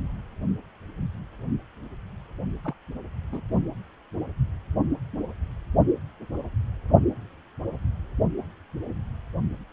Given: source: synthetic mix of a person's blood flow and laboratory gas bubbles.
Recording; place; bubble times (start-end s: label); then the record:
Doppler ultrasound of blood flow; precordium
2.64-2.74 s: bubbles
3.32-3.41 s: bubbles
From the record:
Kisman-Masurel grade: 111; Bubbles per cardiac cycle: 1 to 2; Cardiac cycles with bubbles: 1 to 10%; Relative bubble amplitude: barely perceptible (0.100 to 0.250); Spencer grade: 1 (occasional bubble signal discernible with the cardiac motion signal, with majority of cardiac periods free of bubbles); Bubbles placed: only in the low amplitude regions of the cardiac cycle